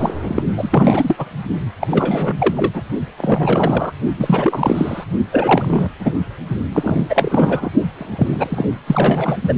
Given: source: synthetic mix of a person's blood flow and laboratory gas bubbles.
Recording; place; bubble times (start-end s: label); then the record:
Doppler ultrasound of blood flow; precordium
0.00-0.14 s: bubbles
0.27-0.43 s: bubbles
0.57-1.29 s: bubbles
1.80-1.87 s: bubbles
1.91-2.83 s: bubbles
3.17-3.92 s: bubbles
4.17-5.04 s: bubbles
5.32-5.89 s: bubbles
5.99-6.19 s: bubbles
6.72-7.04 s: bubbles
7.09-7.70 s: bubbles
7.95-8.74 s: bubbles
8.87-9.39 s: bubbles
9.42-9.54 s: bubbles
From the record:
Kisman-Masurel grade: 343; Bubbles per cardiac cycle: rolling drumbeat, 9 or more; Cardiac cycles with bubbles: 100%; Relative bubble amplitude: loud (0.450 to 0.775); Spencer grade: 3 (all of the cardiac periods contain showers or single bubble signals, but not dominating or overriding the cardiac motion signals); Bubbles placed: only in the low amplitude regions of the cardiac cycle